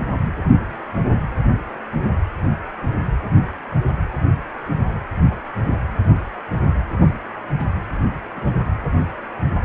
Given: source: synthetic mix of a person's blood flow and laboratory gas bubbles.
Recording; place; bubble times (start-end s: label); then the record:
Doppler ultrasound of blood flow; precordium
4.65-4.69 s: bubbles
5.29-5.38 s: bubbles
5.62-5.74 s: bubbles
7.00-7.15 s: bubbles
7.58-7.65 s: bubbles
8.36-8.69 s: bubbles
From the record:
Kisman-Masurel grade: 121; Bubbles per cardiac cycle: 1 to 2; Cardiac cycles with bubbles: 10 to 50%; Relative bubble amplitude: barely perceptible (0.100 to 0.250); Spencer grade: 2 (many but less than half of the cardiac periods contain bubble signals, singularly or in groups); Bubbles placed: anywhere in the cardiac cycle